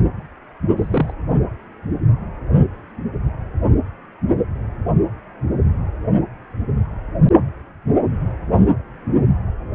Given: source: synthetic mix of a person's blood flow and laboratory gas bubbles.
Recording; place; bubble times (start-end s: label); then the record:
Doppler ultrasound of blood flow; precordium
0.77-1.12 s: bubbles
From the record:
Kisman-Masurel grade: 112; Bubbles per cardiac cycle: 1 to 2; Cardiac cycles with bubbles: 1 to 10%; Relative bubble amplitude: moderate (0.250 to 0.450); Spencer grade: 1 (occasional bubble signal discernible with the cardiac motion signal, with majority of cardiac periods free of bubbles); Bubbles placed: only in the low amplitude regions of the cardiac cycle